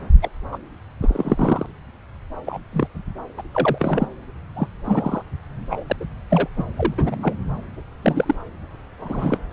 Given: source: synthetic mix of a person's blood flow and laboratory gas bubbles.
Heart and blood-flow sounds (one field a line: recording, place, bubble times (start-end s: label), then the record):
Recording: Doppler ultrasound of blood flow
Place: subclavian vein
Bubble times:
0.21-0.30 s: bubbles
0.52-0.59 s: bubbles
1.01-1.66 s: bubbles
2.46-2.58 s: bubbles
2.73-2.88 s: bubbles
3.37-3.42 s: bubbles
3.53-4.08 s: bubbles
4.56-4.67 s: bubbles
4.84-5.23 s: bubbles
5.70-5.84 s: bubbles
5.90-5.96 s: bubbles
6.00-6.05 s: bubbles
6.29-6.48 s: bubbles
6.57-6.64 s: bubbles
6.77-6.94 s: bubbles
6.98-7.16 s: bubbles
7.21-7.33 s: bubbles
8.03-8.35 s: bubbles
8.98-9.38 s: bubbles
9.51-9.53 s: bubbles
From the record:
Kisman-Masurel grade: 242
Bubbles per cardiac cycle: several, 3 to 8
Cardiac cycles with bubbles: 100%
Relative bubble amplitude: moderate (0.250 to 0.450)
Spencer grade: 3 (all of the cardiac periods contain showers or single bubble signals, but not dominating or overriding the cardiac motion signals)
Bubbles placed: anywhere in the cardiac cycle